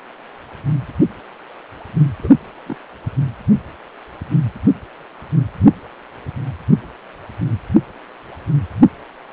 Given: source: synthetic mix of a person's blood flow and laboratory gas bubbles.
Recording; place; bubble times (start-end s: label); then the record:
Doppler ultrasound of blood flow; precordium
2.22-2.34 s: bubbles
2.66-2.76 s: bubbles
From the record:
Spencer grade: 1 (occasional bubble signal discernible with the cardiac motion signal, with majority of cardiac periods free of bubbles); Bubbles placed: anywhere in the cardiac cycle